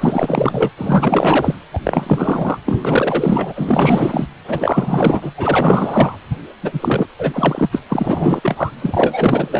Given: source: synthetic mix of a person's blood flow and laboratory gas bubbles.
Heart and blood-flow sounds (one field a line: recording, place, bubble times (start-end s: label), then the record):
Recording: Doppler ultrasound of blood flow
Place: precordium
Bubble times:
0.00-0.69 s: bubbles
0.78-1.55 s: bubbles
1.72-1.79 s: bubbles
1.83-2.58 s: bubbles
2.65-4.28 s: bubbles
4.47-5.32 s: bubbles
5.38-6.17 s: bubbles
6.62-7.07 s: bubbles
7.19-7.82 s: bubbles
7.89-8.71 s: bubbles
8.81-9.49 s: bubbles
9.51-9.60 s: bubbles
From the record:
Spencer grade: 4 (maximum detectable bubble signal sounding continuously throughout systole and diastole of every cardiac period, and overriding the amplitude of the normal cardiac signals)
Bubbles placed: anywhere in the cardiac cycle